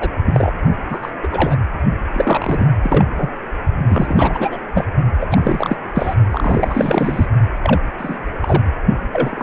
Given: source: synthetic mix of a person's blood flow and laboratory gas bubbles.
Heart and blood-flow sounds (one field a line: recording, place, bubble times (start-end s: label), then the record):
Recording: Doppler ultrasound of blood flow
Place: precordium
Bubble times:
0.00-0.09 s: bubbles
0.25-0.52 s: bubbles
0.90-0.99 s: bubbles
1.02-1.10 s: bubbles
1.23-1.28 s: bubbles
1.31-1.56 s: bubbles
2.14-2.68 s: bubbles
2.81-3.05 s: bubbles
3.16-3.31 s: bubbles
3.89-4.57 s: bubbles
4.75-4.85 s: bubbles
5.21-5.76 s: bubbles
5.94-6.16 s: bubbles
6.31-7.25 s: bubbles
7.63-7.80 s: bubbles
7.98-8.18 s: bubbles
8.42-8.62 s: bubbles
9.12-9.43 s: bubbles
From the record:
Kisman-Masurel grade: 242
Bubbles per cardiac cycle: several, 3 to 8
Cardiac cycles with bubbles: 100%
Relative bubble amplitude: moderate (0.250 to 0.450)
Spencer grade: 3 (all of the cardiac periods contain showers or single bubble signals, but not dominating or overriding the cardiac motion signals)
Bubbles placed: only in the low amplitude regions of the cardiac cycle